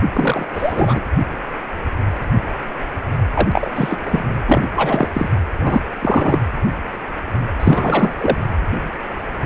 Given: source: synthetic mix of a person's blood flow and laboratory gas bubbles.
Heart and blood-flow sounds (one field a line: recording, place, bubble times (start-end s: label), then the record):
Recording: Doppler ultrasound of blood flow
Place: precordium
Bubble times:
0.13-0.48 s: bubbles
0.54-1.00 s: bubbles
3.33-3.47 s: bubbles
3.52-3.72 s: bubbles
3.75-3.97 s: bubbles
4.05-4.23 s: bubbles
4.46-4.67 s: bubbles
4.75-5.08 s: bubbles
5.13-5.29 s: bubbles
5.58-5.80 s: bubbles
6.01-6.38 s: bubbles
7.59-8.14 s: bubbles
8.21-8.38 s: bubbles
From the record:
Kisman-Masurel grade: 223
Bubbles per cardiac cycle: several, 3 to 8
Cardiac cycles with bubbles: 10 to 50%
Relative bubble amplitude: loud (0.450 to 0.775)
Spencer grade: 2 (many but less than half of the cardiac periods contain bubble signals, singularly or in groups)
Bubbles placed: anywhere in the cardiac cycle